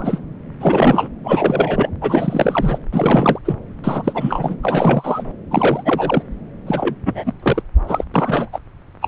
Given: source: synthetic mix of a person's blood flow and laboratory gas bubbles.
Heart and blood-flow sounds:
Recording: Doppler ultrasound of blood flow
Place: subclavian vein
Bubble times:
0.00-0.19 s: bubbles
0.60-1.08 s: bubbles
1.24-1.89 s: bubbles
2.01-2.79 s: bubbles
2.92-3.39 s: bubbles
3.45-3.54 s: bubbles
3.83-4.58 s: bubbles
4.62-5.23 s: bubbles
5.50-6.22 s: bubbles
6.67-6.95 s: bubbles
7.05-7.33 s: bubbles
7.42-7.62 s: bubbles
7.87-8.04 s: bubbles
8.14-8.50 s: bubbles
8.53-8.58 s: bubbles
9.02-9.08 s: bubbles
From the record:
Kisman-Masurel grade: 343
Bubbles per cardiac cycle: rolling drumbeat, 9 or more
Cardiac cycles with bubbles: 100%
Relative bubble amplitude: loud (0.450 to 0.775)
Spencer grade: 3 (all of the cardiac periods contain showers or single bubble signals, but not dominating or overriding the cardiac motion signals)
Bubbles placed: anywhere in the cardiac cycle

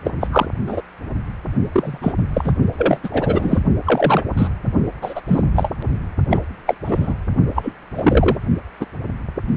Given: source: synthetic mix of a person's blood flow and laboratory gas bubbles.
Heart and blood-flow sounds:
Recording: Doppler ultrasound of blood flow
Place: precordium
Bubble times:
0.04-0.13 s: bubbles
0.20-0.27 s: bubbles
0.32-0.46 s: bubbles
0.66-0.81 s: bubbles
1.72-1.99 s: bubbles
2.01-2.12 s: bubbles
2.34-2.53 s: bubbles
2.77-3.09 s: bubbles
3.12-3.60 s: bubbles
3.85-4.23 s: bubbles
4.37-4.47 s: bubbles
5.01-5.21 s: bubbles
5.27-5.41 s: bubbles
5.55-5.71 s: bubbles
6.30-6.42 s: bubbles
6.67-6.75 s: bubbles
6.85-7.14 s: bubbles
7.54-7.73 s: bubbles
7.95-8.38 s: bubbles
8.80-8.86 s: bubbles
From the record:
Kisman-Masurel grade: 243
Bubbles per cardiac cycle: several, 3 to 8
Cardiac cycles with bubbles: 100%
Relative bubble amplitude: loud (0.450 to 0.775)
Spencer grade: 3 (all of the cardiac periods contain showers or single bubble signals, but not dominating or overriding the cardiac motion signals)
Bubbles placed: only in the low amplitude regions of the cardiac cycle

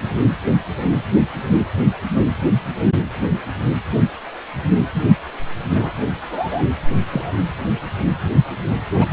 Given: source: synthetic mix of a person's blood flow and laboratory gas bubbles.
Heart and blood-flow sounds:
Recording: Doppler ultrasound of blood flow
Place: precordium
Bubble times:
5.75-5.93 s: bubbles
6.20-6.63 s: bubbles
7.08-7.43 s: bubbles
8.99-9.06 s: bubbles
From the record:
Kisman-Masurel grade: 122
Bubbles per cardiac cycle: 1 to 2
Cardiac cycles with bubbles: 10 to 50%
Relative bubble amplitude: moderate (0.250 to 0.450)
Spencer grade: 2 (many but less than half of the cardiac periods contain bubble signals, singularly or in groups)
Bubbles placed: anywhere in the cardiac cycle

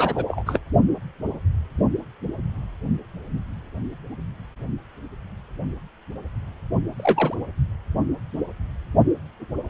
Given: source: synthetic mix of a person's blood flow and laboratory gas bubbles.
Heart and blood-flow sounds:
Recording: Doppler ultrasound of blood flow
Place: precordium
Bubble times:
0.00-0.24 s: bubbles
0.28-0.44 s: bubbles
0.46-0.59 s: bubbles
6.96-7.35 s: bubbles
From the record:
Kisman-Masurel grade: 222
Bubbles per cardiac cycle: several, 3 to 8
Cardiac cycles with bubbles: 10 to 50%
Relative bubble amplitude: moderate (0.250 to 0.450)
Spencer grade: 2 (many but less than half of the cardiac periods contain bubble signals, singularly or in groups)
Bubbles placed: only in the low amplitude regions of the cardiac cycle

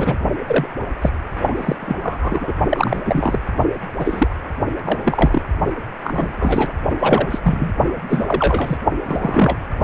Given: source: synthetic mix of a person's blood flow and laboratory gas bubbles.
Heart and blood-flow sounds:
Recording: Doppler ultrasound of blood flow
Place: precordium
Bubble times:
0.00-0.17 s: bubbles
0.47-0.66 s: bubbles
1.01-1.10 s: bubbles
1.47-1.76 s: bubbles
1.79-1.95 s: bubbles
2.03-2.53 s: bubbles
2.69-3.01 s: bubbles
3.05-3.39 s: bubbles
3.98-4.34 s: bubbles
4.84-4.99 s: bubbles
5.05-5.42 s: bubbles
6.04-6.33 s: bubbles
6.37-6.73 s: bubbles
6.98-7.38 s: bubbles
7.43-7.72 s: bubbles
8.09-8.78 s: bubbles
9.05-9.59 s: bubbles
From the record:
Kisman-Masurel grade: 243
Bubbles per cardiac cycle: several, 3 to 8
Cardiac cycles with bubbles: 100%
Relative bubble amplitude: loud (0.450 to 0.775)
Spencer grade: 3 (all of the cardiac periods contain showers or single bubble signals, but not dominating or overriding the cardiac motion signals)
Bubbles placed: only in the low amplitude regions of the cardiac cycle

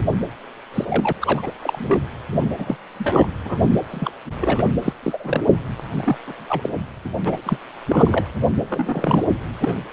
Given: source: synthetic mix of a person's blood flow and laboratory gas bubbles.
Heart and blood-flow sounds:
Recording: Doppler ultrasound of blood flow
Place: precordium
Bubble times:
0.73-1.12 s: bubbles
1.20-1.52 s: bubbles
1.61-2.02 s: bubbles
2.31-2.53 s: bubbles
2.57-2.77 s: bubbles
2.98-3.27 s: bubbles
3.44-3.80 s: bubbles
3.91-4.11 s: bubbles
4.40-4.68 s: bubbles
4.83-4.93 s: bubbles
5.03-5.43 s: bubbles
5.52-5.58 s: bubbles
5.91-6.18 s: bubbles
6.27-6.33 s: bubbles
6.49-6.70 s: bubbles
7.04-7.09 s: bubbles
7.25-7.58 s: bubbles
7.89-8.30 s: bubbles
8.69-9.24 s: bubbles
9.59-9.77 s: bubbles
From the record:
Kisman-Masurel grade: 242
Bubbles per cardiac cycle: several, 3 to 8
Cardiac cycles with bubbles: 100%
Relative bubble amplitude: moderate (0.250 to 0.450)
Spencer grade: 3 (all of the cardiac periods contain showers or single bubble signals, but not dominating or overriding the cardiac motion signals)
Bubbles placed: anywhere in the cardiac cycle

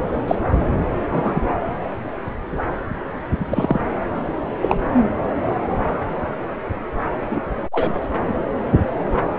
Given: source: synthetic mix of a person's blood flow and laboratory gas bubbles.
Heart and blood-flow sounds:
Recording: Doppler ultrasound of blood flow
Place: subclavian vein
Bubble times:
0.27-0.36 s: bubbles
1.11-1.40 s: bubbles
3.48-3.81 s: bubbles
4.61-4.76 s: bubbles
7.29-7.42 s: bubbles
7.71-7.93 s: bubbles
From the record:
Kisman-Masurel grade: 123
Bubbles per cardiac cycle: 1 to 2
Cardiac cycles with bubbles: 10 to 50%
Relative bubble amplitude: loud (0.450 to 0.775)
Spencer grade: 2 (many but less than half of the cardiac periods contain bubble signals, singularly or in groups)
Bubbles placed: anywhere in the cardiac cycle

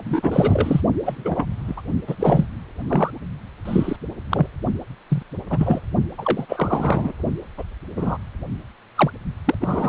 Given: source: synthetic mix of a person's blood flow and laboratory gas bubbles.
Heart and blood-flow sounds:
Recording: Doppler ultrasound of blood flow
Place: precordium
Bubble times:
0.04-0.81 s: bubbles
1.05-1.46 s: bubbles
1.68-1.75 s: bubbles
1.77-1.81 s: bubbles
2.07-2.15 s: bubbles
2.19-2.45 s: bubbles
2.88-3.10 s: bubbles
3.65-3.96 s: bubbles
4.31-4.46 s: bubbles
5.09-5.22 s: bubbles
5.50-5.80 s: bubbles
6.18-6.46 s: bubbles
6.49-7.12 s: bubbles
7.58-7.63 s: bubbles
7.96-8.18 s: bubbles
8.96-9.11 s: bubbles
9.45-9.54 s: bubbles
9.61-9.89 s: bubbles
From the record:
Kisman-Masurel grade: 242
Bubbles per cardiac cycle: several, 3 to 8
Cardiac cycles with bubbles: 100%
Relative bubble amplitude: moderate (0.250 to 0.450)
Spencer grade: 3 (all of the cardiac periods contain showers or single bubble signals, but not dominating or overriding the cardiac motion signals)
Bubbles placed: only in the low amplitude regions of the cardiac cycle

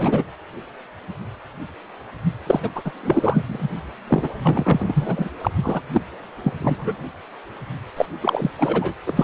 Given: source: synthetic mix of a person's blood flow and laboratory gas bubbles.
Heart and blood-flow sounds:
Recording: Doppler ultrasound of blood flow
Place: precordium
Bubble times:
0.00-0.24 s: bubbles
2.46-2.60 s: bubbles
2.62-2.69 s: bubbles
2.75-2.82 s: bubbles
2.85-2.92 s: bubbles
3.00-3.69 s: bubbles
4.08-4.29 s: bubbles
4.42-5.29 s: bubbles
5.41-5.49 s: bubbles
5.63-5.81 s: bubbles
5.93-6.01 s: bubbles
6.43-6.53 s: bubbles
6.59-6.75 s: bubbles
6.79-6.96 s: bubbles
7.97-8.06 s: bubbles
8.22-8.51 s: bubbles
8.58-8.94 s: bubbles
9.07-9.24 s: bubbles
From the record:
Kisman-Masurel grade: 332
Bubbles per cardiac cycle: rolling drumbeat, 9 or more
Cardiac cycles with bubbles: 50 to 99%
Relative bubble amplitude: moderate (0.250 to 0.450)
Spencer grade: 3 (all of the cardiac periods contain showers or single bubble signals, but not dominating or overriding the cardiac motion signals)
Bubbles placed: anywhere in the cardiac cycle

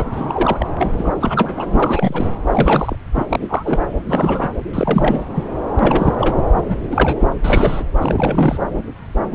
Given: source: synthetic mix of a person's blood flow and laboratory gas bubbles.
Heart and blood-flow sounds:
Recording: Doppler ultrasound of blood flow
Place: subclavian vein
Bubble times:
0.00-0.05 s: bubbles
0.12-0.69 s: bubbles
0.76-0.92 s: bubbles
0.98-1.09 s: bubbles
1.20-1.67 s: bubbles
1.73-2.27 s: bubbles
2.47-2.96 s: bubbles
3.14-3.27 s: bubbles
3.29-3.80 s: bubbles
3.99-4.49 s: bubbles
4.73-5.26 s: bubbles
5.35-5.47 s: bubbles
5.79-6.15 s: bubbles
6.18-6.36 s: bubbles
6.56-6.62 s: bubbles
6.68-6.78 s: bubbles
6.91-7.34 s: bubbles
7.44-7.85 s: bubbles
8.00-8.58 s: bubbles
From the record:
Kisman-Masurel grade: 332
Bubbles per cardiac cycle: rolling drumbeat, 9 or more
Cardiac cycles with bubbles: 50 to 99%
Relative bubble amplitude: moderate (0.250 to 0.450)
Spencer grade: 3 (all of the cardiac periods contain showers or single bubble signals, but not dominating or overriding the cardiac motion signals)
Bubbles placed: anywhere in the cardiac cycle

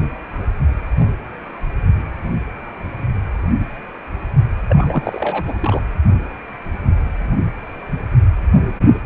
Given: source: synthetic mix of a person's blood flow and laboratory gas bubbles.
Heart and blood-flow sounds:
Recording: Doppler ultrasound of blood flow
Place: precordium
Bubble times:
4.68-5.43 s: bubbles
5.46-5.53 s: bubbles
5.61-5.81 s: bubbles
From the record:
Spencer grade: 1 (occasional bubble signal discernible with the cardiac motion signal, with majority of cardiac periods free of bubbles)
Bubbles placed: anywhere in the cardiac cycle

